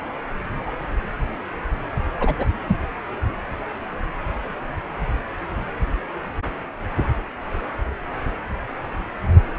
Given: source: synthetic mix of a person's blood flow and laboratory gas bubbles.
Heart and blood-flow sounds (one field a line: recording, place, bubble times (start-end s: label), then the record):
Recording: Doppler ultrasound of blood flow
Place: precordium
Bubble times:
2.20-2.33 s: bubbles
2.39-2.46 s: bubbles
2.67-2.76 s: bubbles
From the record:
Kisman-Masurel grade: 122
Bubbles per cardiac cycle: 1 to 2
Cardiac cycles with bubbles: 10 to 50%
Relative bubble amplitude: moderate (0.250 to 0.450)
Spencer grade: 2 (many but less than half of the cardiac periods contain bubble signals, singularly or in groups)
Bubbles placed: anywhere in the cardiac cycle